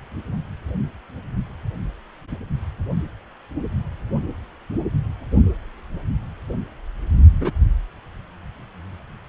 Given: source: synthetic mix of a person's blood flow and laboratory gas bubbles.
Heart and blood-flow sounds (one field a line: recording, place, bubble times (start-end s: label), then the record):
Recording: Doppler ultrasound of blood flow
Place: precordium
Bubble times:
7.39-7.51 s: bubbles
From the record:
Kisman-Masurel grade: 112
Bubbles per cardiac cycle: 1 to 2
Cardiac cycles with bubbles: 1 to 10%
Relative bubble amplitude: moderate (0.250 to 0.450)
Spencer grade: 1 (occasional bubble signal discernible with the cardiac motion signal, with majority of cardiac periods free of bubbles)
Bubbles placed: only in the low amplitude regions of the cardiac cycle